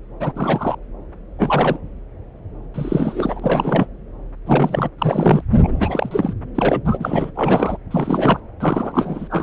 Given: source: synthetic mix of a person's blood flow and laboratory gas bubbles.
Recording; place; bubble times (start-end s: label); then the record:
Doppler ultrasound of blood flow; subclavian vein
0.20-0.32 s: bubbles
0.36-0.75 s: bubbles
1.39-1.79 s: bubbles
2.74-3.87 s: bubbles
4.46-4.89 s: bubbles
4.98-5.42 s: bubbles
5.63-6.33 s: bubbles
6.42-6.44 s: bubbles
6.54-6.81 s: bubbles
6.85-7.31 s: bubbles
7.35-7.77 s: bubbles
7.91-8.40 s: bubbles
8.60-9.43 s: bubbles
From the record:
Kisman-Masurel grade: 332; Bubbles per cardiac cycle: rolling drumbeat, 9 or more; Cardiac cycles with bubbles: 50 to 99%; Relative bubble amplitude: moderate (0.250 to 0.450); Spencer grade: 3 (all of the cardiac periods contain showers or single bubble signals, but not dominating or overriding the cardiac motion signals); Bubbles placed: anywhere in the cardiac cycle